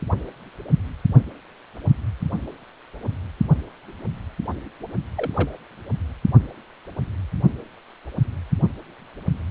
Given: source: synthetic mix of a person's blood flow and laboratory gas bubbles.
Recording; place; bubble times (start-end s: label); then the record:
Doppler ultrasound of blood flow; precordium
5.17-5.58 s: bubbles
From the record:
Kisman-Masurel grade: 112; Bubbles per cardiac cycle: 1 to 2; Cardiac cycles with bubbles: 1 to 10%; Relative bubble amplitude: moderate (0.250 to 0.450); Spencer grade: 1 (occasional bubble signal discernible with the cardiac motion signal, with majority of cardiac periods free of bubbles); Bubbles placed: only in the low amplitude regions of the cardiac cycle